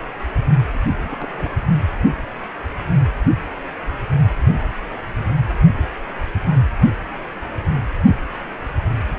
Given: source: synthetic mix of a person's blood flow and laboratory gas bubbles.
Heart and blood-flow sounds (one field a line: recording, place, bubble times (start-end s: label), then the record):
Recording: Doppler ultrasound of blood flow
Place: precordium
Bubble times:
0.73-0.78 s: bubbles
1.04-1.56 s: bubbles
From the record:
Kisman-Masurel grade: 211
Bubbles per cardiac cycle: several, 3 to 8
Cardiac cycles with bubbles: 1 to 10%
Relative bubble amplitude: barely perceptible (0.100 to 0.250)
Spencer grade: 1 (occasional bubble signal discernible with the cardiac motion signal, with majority of cardiac periods free of bubbles)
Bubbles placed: anywhere in the cardiac cycle